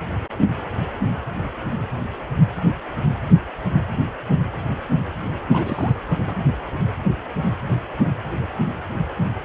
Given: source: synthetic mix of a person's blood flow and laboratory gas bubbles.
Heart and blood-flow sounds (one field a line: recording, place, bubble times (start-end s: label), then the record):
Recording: Doppler ultrasound of blood flow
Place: precordium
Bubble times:
5.50-5.96 s: bubbles
6.09-6.17 s: bubbles
6.27-6.35 s: bubbles
From the record:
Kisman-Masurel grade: 211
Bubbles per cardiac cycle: several, 3 to 8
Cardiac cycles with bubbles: 1 to 10%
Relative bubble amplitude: barely perceptible (0.100 to 0.250)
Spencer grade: 1 (occasional bubble signal discernible with the cardiac motion signal, with majority of cardiac periods free of bubbles)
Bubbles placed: anywhere in the cardiac cycle